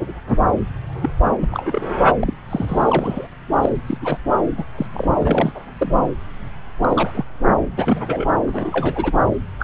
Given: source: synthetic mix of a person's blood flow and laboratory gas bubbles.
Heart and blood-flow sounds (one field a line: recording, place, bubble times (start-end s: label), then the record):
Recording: Doppler ultrasound of blood flow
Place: subclavian vein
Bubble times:
1.02-1.09 s: bubbles
1.41-1.48 s: bubbles
1.51-1.90 s: bubbles
2.21-2.33 s: bubbles
2.50-3.27 s: bubbles
3.52-3.58 s: bubbles
3.62-3.70 s: bubbles
3.88-3.98 s: bubbles
4.01-4.17 s: bubbles
4.57-4.64 s: bubbles
4.78-4.86 s: bubbles
4.93-5.07 s: bubbles
5.20-5.52 s: bubbles
5.55-5.60 s: bubbles
5.79-5.95 s: bubbles
6.82-7.25 s: bubbles
7.76-8.26 s: bubbles
8.46-9.12 s: bubbles
9.59-9.63 s: bubbles
From the record:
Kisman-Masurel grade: 232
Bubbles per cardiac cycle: several, 3 to 8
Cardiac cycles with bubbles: 50 to 99%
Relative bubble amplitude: moderate (0.250 to 0.450)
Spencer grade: 3 (all of the cardiac periods contain showers or single bubble signals, but not dominating or overriding the cardiac motion signals)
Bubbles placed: anywhere in the cardiac cycle